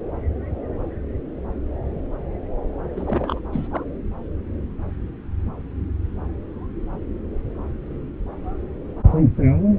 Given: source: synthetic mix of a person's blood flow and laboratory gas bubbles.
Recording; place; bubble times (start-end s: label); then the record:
Doppler ultrasound of blood flow; subclavian vein
2.96-3.40 s: bubbles
3.53-3.68 s: bubbles
3.71-3.83 s: bubbles
From the record:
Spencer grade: 1 (occasional bubble signal discernible with the cardiac motion signal, with majority of cardiac periods free of bubbles); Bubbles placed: anywhere in the cardiac cycle